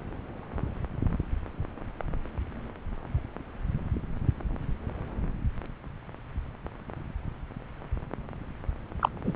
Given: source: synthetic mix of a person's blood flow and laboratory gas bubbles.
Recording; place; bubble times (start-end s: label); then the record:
Doppler ultrasound of blood flow; subclavian vein
8.99-9.09 s: bubbles
9.24-9.33 s: bubbles
From the record:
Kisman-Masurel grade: 113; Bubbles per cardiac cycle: 1 to 2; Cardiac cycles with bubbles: 1 to 10%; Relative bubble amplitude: loud (0.450 to 0.775); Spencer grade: 1 (occasional bubble signal discernible with the cardiac motion signal, with majority of cardiac periods free of bubbles); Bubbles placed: anywhere in the cardiac cycle